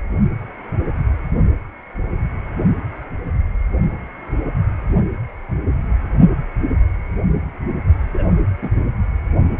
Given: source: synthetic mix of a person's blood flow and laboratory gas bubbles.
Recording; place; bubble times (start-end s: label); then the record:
Doppler ultrasound of blood flow; precordium
8.13-8.26 s: bubbles
8.62-8.71 s: bubbles
From the record:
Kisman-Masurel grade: 112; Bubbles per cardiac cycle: 1 to 2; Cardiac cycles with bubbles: 1 to 10%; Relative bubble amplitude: moderate (0.250 to 0.450); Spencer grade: 1 (occasional bubble signal discernible with the cardiac motion signal, with majority of cardiac periods free of bubbles); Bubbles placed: only in the low amplitude regions of the cardiac cycle